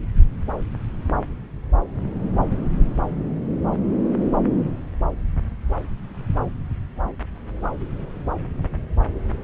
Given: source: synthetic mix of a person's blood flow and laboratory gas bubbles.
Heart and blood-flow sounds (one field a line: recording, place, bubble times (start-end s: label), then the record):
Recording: Doppler ultrasound of blood flow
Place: subclavian vein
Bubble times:
no bubbles
From the record:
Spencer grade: 0 (complete lack of bubble signals)